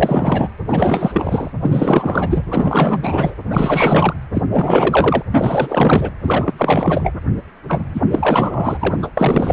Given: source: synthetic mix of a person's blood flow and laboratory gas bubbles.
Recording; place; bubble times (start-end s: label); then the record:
Doppler ultrasound of blood flow; precordium
0.00-0.48 s: bubbles
0.68-1.52 s: bubbles
1.61-2.43 s: bubbles
2.50-3.34 s: bubbles
3.50-4.14 s: bubbles
4.33-4.42 s: bubbles
4.51-5.23 s: bubbles
5.32-6.10 s: bubbles
6.22-6.54 s: bubbles
6.58-7.12 s: bubbles
7.68-7.82 s: bubbles
7.93-8.00 s: bubbles
8.10-8.94 s: bubbles
9.02-9.08 s: bubbles
9.17-9.53 s: bubbles
From the record:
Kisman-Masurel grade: 444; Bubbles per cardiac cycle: continuous sound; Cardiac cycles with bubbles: 100%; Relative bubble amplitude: maximal (0.775 to 0.999); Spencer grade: 4 (maximum detectable bubble signal sounding continuously throughout systole and diastole of every cardiac period, and overriding the amplitude of the normal cardiac signals); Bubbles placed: anywhere in the cardiac cycle